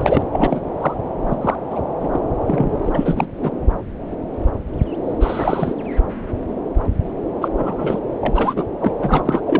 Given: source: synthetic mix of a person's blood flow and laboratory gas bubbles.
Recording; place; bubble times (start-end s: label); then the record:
Doppler ultrasound of blood flow; subclavian vein
0.00-0.23 s: bubbles
0.32-0.61 s: bubbles
0.80-0.94 s: bubbles
1.25-1.36 s: bubbles
1.41-1.55 s: bubbles
1.70-1.81 s: bubbles
2.00-2.08 s: bubbles
2.12-2.20 s: bubbles
2.46-2.80 s: bubbles
2.83-3.27 s: bubbles
3.42-3.50 s: bubbles
5.20-5.75 s: bubbles
7.41-7.48 s: bubbles
7.58-7.99 s: bubbles
8.21-8.64 s: bubbles
8.81-8.92 s: bubbles
9.00-9.41 s: bubbles
9.46-9.60 s: bubbles
From the record:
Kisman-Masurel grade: 233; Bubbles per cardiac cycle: several, 3 to 8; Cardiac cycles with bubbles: 50 to 99%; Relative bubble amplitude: loud (0.450 to 0.775); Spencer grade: 3 (all of the cardiac periods contain showers or single bubble signals, but not dominating or overriding the cardiac motion signals); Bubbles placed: anywhere in the cardiac cycle